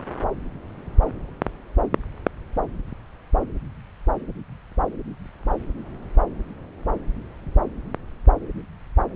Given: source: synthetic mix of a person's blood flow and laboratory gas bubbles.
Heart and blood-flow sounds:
Doppler ultrasound of blood flow; subclavian vein
no bubbles
From the record:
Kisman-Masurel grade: 000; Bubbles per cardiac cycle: 0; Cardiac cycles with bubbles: 0%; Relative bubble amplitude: no bubbles discernible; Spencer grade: 0 (complete lack of bubble signals)

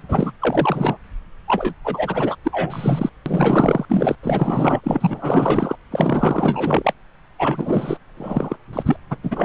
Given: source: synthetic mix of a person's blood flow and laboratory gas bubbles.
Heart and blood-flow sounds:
Doppler ultrasound of blood flow; subclavian vein
0.09-0.32 s: bubbles
0.41-0.97 s: bubbles
1.47-1.74 s: bubbles
1.84-2.36 s: bubbles
2.44-3.09 s: bubbles
3.26-3.85 s: bubbles
3.89-4.15 s: bubbles
4.22-4.80 s: bubbles
4.83-5.75 s: bubbles
5.91-6.93 s: bubbles
7.38-7.97 s: bubbles
8.17-8.56 s: bubbles
8.72-8.97 s: bubbles
9.10-9.16 s: bubbles
9.23-9.44 s: bubbles
From the record:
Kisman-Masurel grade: 444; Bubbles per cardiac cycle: continuous sound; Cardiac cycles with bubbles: 100%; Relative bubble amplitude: maximal (0.775 to 0.999); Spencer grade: 4 (maximum detectable bubble signal sounding continuously throughout systole and diastole of every cardiac period, and overriding the amplitude of the normal cardiac signals); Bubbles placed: anywhere in the cardiac cycle

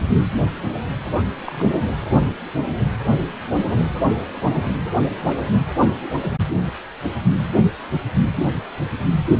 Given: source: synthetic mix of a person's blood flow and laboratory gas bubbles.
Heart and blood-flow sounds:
Doppler ultrasound of blood flow; precordium
1.45-1.87 s: bubbles
5.24-5.39 s: bubbles
From the record:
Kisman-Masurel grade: 121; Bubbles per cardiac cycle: 1 to 2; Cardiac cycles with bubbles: 10 to 50%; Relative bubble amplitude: barely perceptible (0.100 to 0.250); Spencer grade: 2 (many but less than half of the cardiac periods contain bubble signals, singularly or in groups); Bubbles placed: anywhere in the cardiac cycle

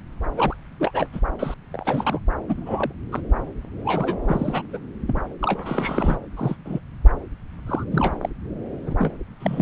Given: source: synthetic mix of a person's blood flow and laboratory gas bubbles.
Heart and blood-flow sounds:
Doppler ultrasound of blood flow; subclavian vein
0.36-0.56 s: bubbles
0.80-1.08 s: bubbles
1.12-1.19 s: bubbles
1.39-1.54 s: bubbles
1.73-2.19 s: bubbles
2.48-2.92 s: bubbles
3.11-3.21 s: bubbles
3.85-4.17 s: bubbles
4.28-4.62 s: bubbles
4.72-4.78 s: bubbles
5.06-5.21 s: bubbles
5.42-6.18 s: bubbles
6.37-6.56 s: bubbles
6.65-6.79 s: bubbles
7.66-7.84 s: bubbles
7.92-8.13 s: bubbles
8.21-8.29 s: bubbles
8.84-8.96 s: bubbles
8.98-9.13 s: bubbles
9.39-9.62 s: bubbles
From the record:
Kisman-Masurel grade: 242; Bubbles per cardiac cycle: several, 3 to 8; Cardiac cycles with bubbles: 100%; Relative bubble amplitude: moderate (0.250 to 0.450); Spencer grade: 3 (all of the cardiac periods contain showers or single bubble signals, but not dominating or overriding the cardiac motion signals); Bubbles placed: anywhere in the cardiac cycle

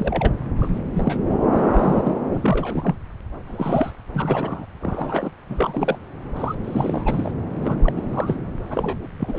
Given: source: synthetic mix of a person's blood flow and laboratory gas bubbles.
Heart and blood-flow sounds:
Doppler ultrasound of blood flow; subclavian vein
0.00-0.32 s: bubbles
0.57-0.79 s: bubbles
0.94-1.20 s: bubbles
1.52-2.15 s: bubbles
2.34-2.96 s: bubbles
3.47-3.92 s: bubbles
4.13-4.66 s: bubbles
4.81-5.30 s: bubbles
5.49-5.99 s: bubbles
6.35-6.55 s: bubbles
6.64-7.32 s: bubbles
7.62-7.77 s: bubbles
7.83-7.92 s: bubbles
7.95-8.37 s: bubbles
8.68-9.08 s: bubbles
9.19-9.39 s: bubbles
From the record:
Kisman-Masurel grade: 242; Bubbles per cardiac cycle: several, 3 to 8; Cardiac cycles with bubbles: 100%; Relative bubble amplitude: moderate (0.250 to 0.450); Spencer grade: 3 (all of the cardiac periods contain showers or single bubble signals, but not dominating or overriding the cardiac motion signals); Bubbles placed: anywhere in the cardiac cycle

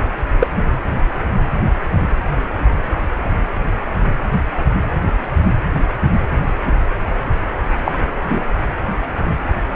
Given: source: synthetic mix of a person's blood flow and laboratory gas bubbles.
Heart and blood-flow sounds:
Doppler ultrasound of blood flow; precordium
0.39-0.47 s: bubbles
7.84-7.92 s: bubbles
8.29-8.41 s: bubbles
From the record:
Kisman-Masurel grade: 113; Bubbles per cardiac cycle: 1 to 2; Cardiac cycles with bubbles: 1 to 10%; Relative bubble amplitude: loud (0.450 to 0.775); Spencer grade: 1 (occasional bubble signal discernible with the cardiac motion signal, with majority of cardiac periods free of bubbles); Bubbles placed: anywhere in the cardiac cycle

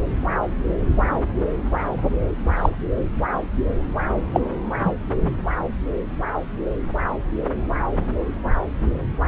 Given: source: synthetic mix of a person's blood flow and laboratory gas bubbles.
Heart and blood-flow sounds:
Doppler ultrasound of blood flow; subclavian vein
2.56-2.70 s: bubbles
4.32-4.40 s: bubbles
4.83-4.94 s: bubbles
From the record:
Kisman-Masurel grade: 123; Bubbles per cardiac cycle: 1 to 2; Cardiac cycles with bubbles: 10 to 50%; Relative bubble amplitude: loud (0.450 to 0.775); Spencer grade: 2 (many but less than half of the cardiac periods contain bubble signals, singularly or in groups); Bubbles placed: anywhere in the cardiac cycle

